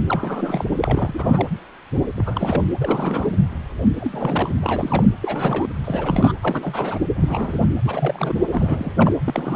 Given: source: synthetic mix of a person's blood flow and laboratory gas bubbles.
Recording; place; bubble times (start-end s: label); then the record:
Doppler ultrasound of blood flow; precordium
0.08-0.64 s: bubbles
0.80-1.48 s: bubbles
2.16-2.64 s: bubbles
2.80-3.28 s: bubbles
4.00-4.54 s: bubbles
4.61-5.08 s: bubbles
5.21-5.78 s: bubbles
5.84-6.33 s: bubbles
6.42-6.99 s: bubbles
7.15-7.66 s: bubbles
7.84-8.34 s: bubbles
8.50-8.93 s: bubbles
8.97-9.14 s: bubbles
9.24-9.56 s: bubbles
From the record:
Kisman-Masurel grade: 332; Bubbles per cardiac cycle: rolling drumbeat, 9 or more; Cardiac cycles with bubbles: 50 to 99%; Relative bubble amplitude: moderate (0.250 to 0.450); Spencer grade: 3 (all of the cardiac periods contain showers or single bubble signals, but not dominating or overriding the cardiac motion signals); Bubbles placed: anywhere in the cardiac cycle